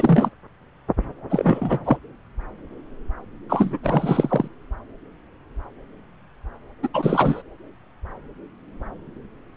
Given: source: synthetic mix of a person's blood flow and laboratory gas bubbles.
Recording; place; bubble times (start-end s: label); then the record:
Doppler ultrasound of blood flow; subclavian vein
0.00-0.30 s: bubbles
1.30-1.97 s: bubbles
3.49-3.79 s: bubbles
3.83-4.48 s: bubbles
6.82-6.88 s: bubbles
6.93-7.42 s: bubbles
From the record:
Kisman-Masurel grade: 333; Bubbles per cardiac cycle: rolling drumbeat, 9 or more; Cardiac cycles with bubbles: 50 to 99%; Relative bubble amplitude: loud (0.450 to 0.775); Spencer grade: 3 (all of the cardiac periods contain showers or single bubble signals, but not dominating or overriding the cardiac motion signals); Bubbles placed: anywhere in the cardiac cycle